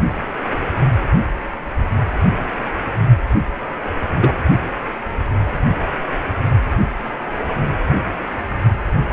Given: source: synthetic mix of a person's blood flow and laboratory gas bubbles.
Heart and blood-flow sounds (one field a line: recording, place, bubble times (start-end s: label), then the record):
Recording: Doppler ultrasound of blood flow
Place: precordium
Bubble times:
4.22-4.32 s: bubbles
From the record:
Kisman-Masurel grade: 113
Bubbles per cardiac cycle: 1 to 2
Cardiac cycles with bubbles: 1 to 10%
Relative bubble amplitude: loud (0.450 to 0.775)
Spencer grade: 1 (occasional bubble signal discernible with the cardiac motion signal, with majority of cardiac periods free of bubbles)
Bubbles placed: anywhere in the cardiac cycle